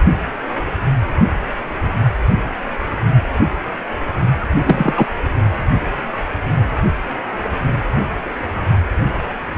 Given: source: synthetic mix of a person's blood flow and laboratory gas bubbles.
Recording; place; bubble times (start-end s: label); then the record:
Doppler ultrasound of blood flow; precordium
4.40-4.46 s: bubbles
4.55-5.07 s: bubbles
From the record:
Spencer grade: 1 (occasional bubble signal discernible with the cardiac motion signal, with majority of cardiac periods free of bubbles); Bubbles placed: only in the low amplitude regions of the cardiac cycle